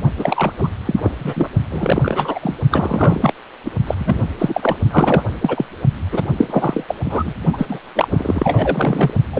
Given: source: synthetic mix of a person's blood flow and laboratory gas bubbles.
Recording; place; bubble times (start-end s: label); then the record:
Doppler ultrasound of blood flow; precordium
0.17-0.53 s: bubbles
0.58-0.68 s: bubbles
0.85-1.11 s: bubbles
1.20-1.50 s: bubbles
1.71-2.40 s: bubbles
2.42-2.60 s: bubbles
2.71-3.33 s: bubbles
3.65-3.70 s: bubbles
3.87-3.94 s: bubbles
3.98-4.30 s: bubbles
4.38-4.76 s: bubbles
4.90-5.22 s: bubbles
5.42-5.65 s: bubbles
6.11-6.21 s: bubbles
6.38-6.84 s: bubbles
6.88-6.95 s: bubbles
7.04-7.33 s: bubbles
7.53-7.66 s: bubbles
7.68-7.79 s: bubbles
7.95-9.13 s: bubbles
9.33-9.40 s: bubbles
From the record:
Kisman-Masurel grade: 343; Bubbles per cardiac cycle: rolling drumbeat, 9 or more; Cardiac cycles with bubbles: 100%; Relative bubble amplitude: loud (0.450 to 0.775); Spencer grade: 3 (all of the cardiac periods contain showers or single bubble signals, but not dominating or overriding the cardiac motion signals); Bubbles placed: only in the low amplitude regions of the cardiac cycle